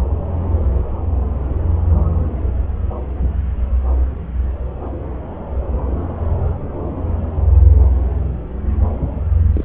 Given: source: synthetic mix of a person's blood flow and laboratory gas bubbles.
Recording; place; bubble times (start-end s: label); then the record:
Doppler ultrasound of blood flow; subclavian vein
9.53-9.65 s: bubbles
From the record:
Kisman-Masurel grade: 221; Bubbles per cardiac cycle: several, 3 to 8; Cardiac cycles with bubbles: 10 to 50%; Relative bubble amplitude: barely perceptible (0.100 to 0.250); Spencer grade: 2 (many but less than half of the cardiac periods contain bubble signals, singularly or in groups); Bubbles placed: anywhere in the cardiac cycle